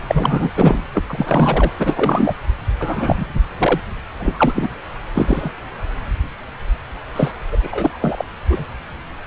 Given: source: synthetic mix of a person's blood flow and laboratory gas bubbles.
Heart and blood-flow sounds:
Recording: Doppler ultrasound of blood flow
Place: subclavian vein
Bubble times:
0.08-0.50 s: bubbles
0.56-0.81 s: bubbles
0.94-1.02 s: bubbles
1.09-1.72 s: bubbles
1.78-2.34 s: bubbles
2.79-3.40 s: bubbles
3.58-3.79 s: bubbles
4.20-4.76 s: bubbles
5.15-5.52 s: bubbles
7.16-7.31 s: bubbles
7.52-7.58 s: bubbles
7.61-8.24 s: bubbles
8.49-8.64 s: bubbles
From the record:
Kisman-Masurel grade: 333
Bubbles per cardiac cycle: rolling drumbeat, 9 or more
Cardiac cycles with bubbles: 50 to 99%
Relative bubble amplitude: loud (0.450 to 0.775)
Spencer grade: 3 (all of the cardiac periods contain showers or single bubble signals, but not dominating or overriding the cardiac motion signals)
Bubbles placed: anywhere in the cardiac cycle

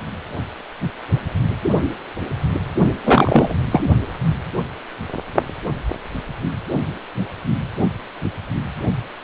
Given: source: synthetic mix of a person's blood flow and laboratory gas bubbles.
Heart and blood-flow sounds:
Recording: Doppler ultrasound of blood flow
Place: precordium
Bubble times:
3.04-3.54 s: bubbles
3.71-3.84 s: bubbles
From the record:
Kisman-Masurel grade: 213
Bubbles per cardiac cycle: several, 3 to 8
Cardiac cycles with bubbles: 1 to 10%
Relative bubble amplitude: loud (0.450 to 0.775)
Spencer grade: 1 (occasional bubble signal discernible with the cardiac motion signal, with majority of cardiac periods free of bubbles)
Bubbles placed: only in the low amplitude regions of the cardiac cycle

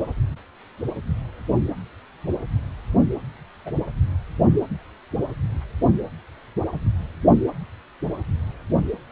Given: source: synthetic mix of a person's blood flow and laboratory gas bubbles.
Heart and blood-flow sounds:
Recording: Doppler ultrasound of blood flow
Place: precordium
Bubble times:
3.65-3.72 s: bubbles
From the record:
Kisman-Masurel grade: 111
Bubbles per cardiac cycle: 1 to 2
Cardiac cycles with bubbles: 1 to 10%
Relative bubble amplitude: barely perceptible (0.100 to 0.250)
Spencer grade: 1 (occasional bubble signal discernible with the cardiac motion signal, with majority of cardiac periods free of bubbles)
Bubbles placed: anywhere in the cardiac cycle

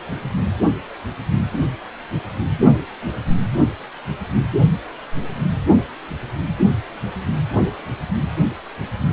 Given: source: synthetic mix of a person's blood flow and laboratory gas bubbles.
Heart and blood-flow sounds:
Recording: Doppler ultrasound of blood flow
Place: precordium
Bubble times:
no bubbles
From the record:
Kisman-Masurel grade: 000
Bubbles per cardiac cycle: 0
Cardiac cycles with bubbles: 0%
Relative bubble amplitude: no bubbles discernible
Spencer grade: 0 (complete lack of bubble signals)

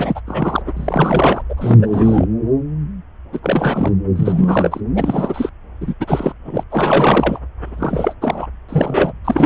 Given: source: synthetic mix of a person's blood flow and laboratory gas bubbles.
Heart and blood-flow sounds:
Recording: Doppler ultrasound of blood flow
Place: subclavian vein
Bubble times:
0.00-0.20 s: bubbles
0.27-0.62 s: bubbles
0.66-0.73 s: bubbles
0.76-1.42 s: bubbles
1.49-2.26 s: bubbles
3.33-3.40 s: bubbles
3.42-3.93 s: bubbles
4.16-4.80 s: bubbles
4.95-5.50 s: bubbles
5.80-5.94 s: bubbles
6.00-6.33 s: bubbles
6.45-6.63 s: bubbles
6.70-7.39 s: bubbles
7.64-8.14 s: bubbles
8.22-8.47 s: bubbles
8.69-9.12 s: bubbles
9.24-9.46 s: bubbles
From the record:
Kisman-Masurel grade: 333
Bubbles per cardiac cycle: rolling drumbeat, 9 or more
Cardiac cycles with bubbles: 50 to 99%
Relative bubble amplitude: loud (0.450 to 0.775)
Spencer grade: 3 (all of the cardiac periods contain showers or single bubble signals, but not dominating or overriding the cardiac motion signals)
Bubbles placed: anywhere in the cardiac cycle

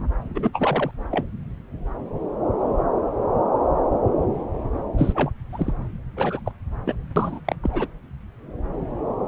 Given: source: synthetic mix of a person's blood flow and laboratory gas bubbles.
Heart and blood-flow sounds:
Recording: Doppler ultrasound of blood flow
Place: subclavian vein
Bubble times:
0.35-0.50 s: bubbles
0.53-0.91 s: bubbles
1.10-1.25 s: bubbles
4.97-5.30 s: bubbles
5.52-5.72 s: bubbles
6.17-6.40 s: bubbles
6.45-6.51 s: bubbles
6.86-6.93 s: bubbles
7.16-7.39 s: bubbles
7.45-7.56 s: bubbles
7.63-7.87 s: bubbles
From the record:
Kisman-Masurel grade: 222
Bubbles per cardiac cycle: several, 3 to 8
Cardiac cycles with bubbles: 10 to 50%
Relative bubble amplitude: moderate (0.250 to 0.450)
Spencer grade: 2 (many but less than half of the cardiac periods contain bubble signals, singularly or in groups)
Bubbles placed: anywhere in the cardiac cycle

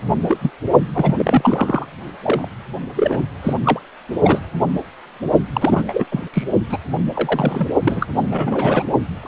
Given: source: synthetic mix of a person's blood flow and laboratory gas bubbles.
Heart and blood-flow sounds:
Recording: Doppler ultrasound of blood flow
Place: precordium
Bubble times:
0.28-0.38 s: bubbles
0.41-0.50 s: bubbles
0.92-1.86 s: bubbles
2.22-2.48 s: bubbles
2.96-3.23 s: bubbles
3.42-3.53 s: bubbles
3.65-3.79 s: bubbles
4.22-4.39 s: bubbles
5.53-6.05 s: bubbles
6.11-6.24 s: bubbles
6.33-6.43 s: bubbles
6.70-6.77 s: bubbles
7.14-7.68 s: bubbles
7.85-8.06 s: bubbles
8.21-8.83 s: bubbles
9.22-9.28 s: bubbles
From the record:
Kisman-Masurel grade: 232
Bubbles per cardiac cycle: several, 3 to 8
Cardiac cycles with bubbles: 50 to 99%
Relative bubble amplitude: moderate (0.250 to 0.450)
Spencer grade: 3 (all of the cardiac periods contain showers or single bubble signals, but not dominating or overriding the cardiac motion signals)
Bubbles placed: only in the low amplitude regions of the cardiac cycle

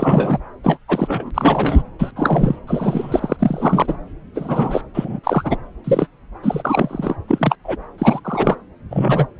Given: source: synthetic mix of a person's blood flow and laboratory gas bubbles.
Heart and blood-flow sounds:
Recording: Doppler ultrasound of blood flow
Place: subclavian vein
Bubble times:
0.00-0.40 s: bubbles
0.63-0.79 s: bubbles
0.88-1.31 s: bubbles
1.34-1.82 s: bubbles
1.99-2.11 s: bubbles
2.15-2.56 s: bubbles
2.67-3.97 s: bubbles
4.35-4.81 s: bubbles
4.94-5.20 s: bubbles
5.24-5.57 s: bubbles
5.84-6.08 s: bubbles
6.43-7.16 s: bubbles
7.28-7.56 s: bubbles
7.64-7.76 s: bubbles
7.98-8.20 s: bubbles
8.24-8.56 s: bubbles
8.90-9.27 s: bubbles
From the record:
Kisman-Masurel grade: 243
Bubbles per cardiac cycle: several, 3 to 8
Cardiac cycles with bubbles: 100%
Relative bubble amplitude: loud (0.450 to 0.775)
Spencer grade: 3 (all of the cardiac periods contain showers or single bubble signals, but not dominating or overriding the cardiac motion signals)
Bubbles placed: anywhere in the cardiac cycle

